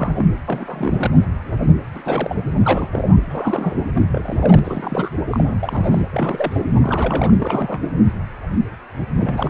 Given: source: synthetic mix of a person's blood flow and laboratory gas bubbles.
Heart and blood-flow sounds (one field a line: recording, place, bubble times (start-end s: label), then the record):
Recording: Doppler ultrasound of blood flow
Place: precordium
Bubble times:
0.00-0.27 s: bubbles
0.46-1.12 s: bubbles
1.94-2.02 s: bubbles
2.05-2.35 s: bubbles
2.64-3.17 s: bubbles
3.21-3.75 s: bubbles
3.95-4.02 s: bubbles
4.12-4.59 s: bubbles
4.64-5.09 s: bubbles
5.31-5.57 s: bubbles
5.62-6.02 s: bubbles
6.10-6.60 s: bubbles
6.75-7.33 s: bubbles
7.40-7.81 s: bubbles
9.19-9.50 s: bubbles
From the record:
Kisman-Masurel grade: 332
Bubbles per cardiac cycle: rolling drumbeat, 9 or more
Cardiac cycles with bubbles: 50 to 99%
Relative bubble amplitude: moderate (0.250 to 0.450)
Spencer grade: 3 (all of the cardiac periods contain showers or single bubble signals, but not dominating or overriding the cardiac motion signals)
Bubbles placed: anywhere in the cardiac cycle